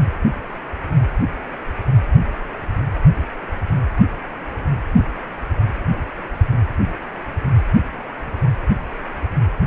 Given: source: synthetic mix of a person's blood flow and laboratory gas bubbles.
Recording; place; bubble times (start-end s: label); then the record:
Doppler ultrasound of blood flow; precordium
no bubbles
From the record:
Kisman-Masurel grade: 000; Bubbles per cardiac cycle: 0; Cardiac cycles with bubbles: 0%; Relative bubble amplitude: no bubbles discernible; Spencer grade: 0 (complete lack of bubble signals)